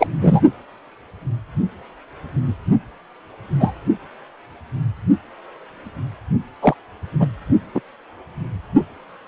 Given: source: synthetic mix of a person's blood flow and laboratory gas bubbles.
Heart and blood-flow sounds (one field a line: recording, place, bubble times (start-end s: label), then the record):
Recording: Doppler ultrasound of blood flow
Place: precordium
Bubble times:
0.00-0.07 s: bubbles
0.22-0.40 s: bubbles
3.60-3.73 s: bubbles
6.62-6.75 s: bubbles
7.19-7.27 s: bubbles
7.74-7.81 s: bubbles
From the record:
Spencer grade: 2 (many but less than half of the cardiac periods contain bubble signals, singularly or in groups)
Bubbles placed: only in the low amplitude regions of the cardiac cycle